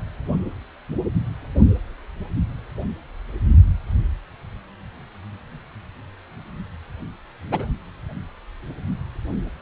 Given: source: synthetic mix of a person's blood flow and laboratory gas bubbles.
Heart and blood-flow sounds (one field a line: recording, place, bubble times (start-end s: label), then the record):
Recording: Doppler ultrasound of blood flow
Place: precordium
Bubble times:
7.51-7.67 s: bubbles
From the record:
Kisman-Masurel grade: 111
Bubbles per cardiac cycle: 1 to 2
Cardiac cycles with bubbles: 1 to 10%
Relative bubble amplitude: barely perceptible (0.100 to 0.250)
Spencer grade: 1 (occasional bubble signal discernible with the cardiac motion signal, with majority of cardiac periods free of bubbles)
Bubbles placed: only in the low amplitude regions of the cardiac cycle